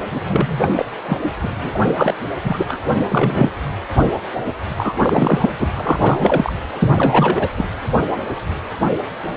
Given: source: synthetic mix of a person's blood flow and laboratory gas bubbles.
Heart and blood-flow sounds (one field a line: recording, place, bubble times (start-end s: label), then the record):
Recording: Doppler ultrasound of blood flow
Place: precordium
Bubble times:
0.11-0.20 s: bubbles
0.24-0.59 s: bubbles
0.61-0.68 s: bubbles
0.77-0.86 s: bubbles
1.04-1.17 s: bubbles
1.23-1.30 s: bubbles
1.42-1.71 s: bubbles
1.74-1.79 s: bubbles
1.96-2.13 s: bubbles
2.44-2.80 s: bubbles
3.01-3.05 s: bubbles
3.08-3.50 s: bubbles
4.78-4.94 s: bubbles
4.99-5.51 s: bubbles
5.60-5.69 s: bubbles
5.77-6.53 s: bubbles
6.73-6.93 s: bubbles
6.97-7.50 s: bubbles
7.56-7.65 s: bubbles
From the record:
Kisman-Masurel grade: 333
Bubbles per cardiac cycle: rolling drumbeat, 9 or more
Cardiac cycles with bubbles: 50 to 99%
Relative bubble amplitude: loud (0.450 to 0.775)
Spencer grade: 3 (all of the cardiac periods contain showers or single bubble signals, but not dominating or overriding the cardiac motion signals)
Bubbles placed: anywhere in the cardiac cycle